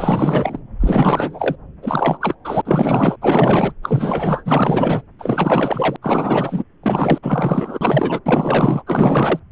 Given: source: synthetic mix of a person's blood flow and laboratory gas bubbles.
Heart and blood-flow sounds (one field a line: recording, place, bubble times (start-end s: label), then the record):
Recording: Doppler ultrasound of blood flow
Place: subclavian vein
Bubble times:
0.00-0.59 s: bubbles
0.80-1.55 s: bubbles
1.82-2.35 s: bubbles
2.45-2.62 s: bubbles
2.65-3.17 s: bubbles
3.22-3.73 s: bubbles
3.83-5.02 s: bubbles
5.18-5.96 s: bubbles
6.02-6.64 s: bubbles
6.83-7.18 s: bubbles
7.22-8.21 s: bubbles
8.25-8.83 s: bubbles
8.87-9.39 s: bubbles
From the record:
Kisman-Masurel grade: 444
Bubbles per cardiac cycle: continuous sound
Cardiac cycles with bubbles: 100%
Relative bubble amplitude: maximal (0.775 to 0.999)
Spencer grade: 4 (maximum detectable bubble signal sounding continuously throughout systole and diastole of every cardiac period, and overriding the amplitude of the normal cardiac signals)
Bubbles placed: anywhere in the cardiac cycle